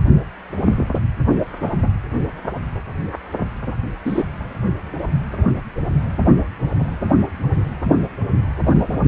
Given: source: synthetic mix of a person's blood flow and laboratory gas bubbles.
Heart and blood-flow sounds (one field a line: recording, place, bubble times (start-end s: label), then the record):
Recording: Doppler ultrasound of blood flow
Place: precordium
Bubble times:
4.04-4.23 s: bubbles
From the record:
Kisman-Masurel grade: 113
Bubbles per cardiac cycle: 1 to 2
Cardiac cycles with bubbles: 1 to 10%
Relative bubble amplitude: loud (0.450 to 0.775)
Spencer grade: 1 (occasional bubble signal discernible with the cardiac motion signal, with majority of cardiac periods free of bubbles)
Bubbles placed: only in the low amplitude regions of the cardiac cycle